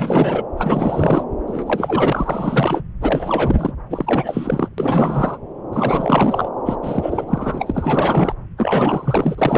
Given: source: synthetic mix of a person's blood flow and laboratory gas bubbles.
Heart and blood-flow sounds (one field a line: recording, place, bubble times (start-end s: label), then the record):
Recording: Doppler ultrasound of blood flow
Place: subclavian vein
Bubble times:
0.00-0.45 s: bubbles
0.57-1.24 s: bubbles
1.47-2.81 s: bubbles
3.01-3.73 s: bubbles
3.90-4.68 s: bubbles
4.78-5.38 s: bubbles
5.72-6.48 s: bubbles
6.65-6.76 s: bubbles
6.82-7.25 s: bubbles
7.27-8.34 s: bubbles
8.58-9.57 s: bubbles
From the record:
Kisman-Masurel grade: 444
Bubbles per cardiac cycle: continuous sound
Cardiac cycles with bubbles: 100%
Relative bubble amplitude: maximal (0.775 to 0.999)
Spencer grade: 4 (maximum detectable bubble signal sounding continuously throughout systole and diastole of every cardiac period, and overriding the amplitude of the normal cardiac signals)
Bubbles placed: anywhere in the cardiac cycle